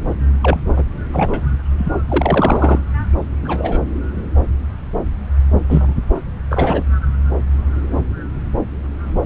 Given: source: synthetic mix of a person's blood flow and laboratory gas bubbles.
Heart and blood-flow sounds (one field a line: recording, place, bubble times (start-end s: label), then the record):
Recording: Doppler ultrasound of blood flow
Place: subclavian vein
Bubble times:
0.42-0.60 s: bubbles
0.76-0.84 s: bubbles
1.13-1.42 s: bubbles
1.78-1.93 s: bubbles
2.08-2.79 s: bubbles
3.42-3.78 s: bubbles
5.68-5.94 s: bubbles
6.50-6.83 s: bubbles
From the record:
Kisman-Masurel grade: 233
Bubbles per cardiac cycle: several, 3 to 8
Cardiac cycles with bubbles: 50 to 99%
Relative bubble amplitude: loud (0.450 to 0.775)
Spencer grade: 3 (all of the cardiac periods contain showers or single bubble signals, but not dominating or overriding the cardiac motion signals)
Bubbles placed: anywhere in the cardiac cycle